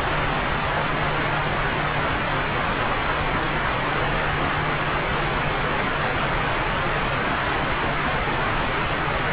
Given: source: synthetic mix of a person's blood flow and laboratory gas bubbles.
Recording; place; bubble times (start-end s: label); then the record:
Doppler ultrasound of blood flow; subclavian vein
no bubbles
From the record:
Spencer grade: 0 (complete lack of bubble signals)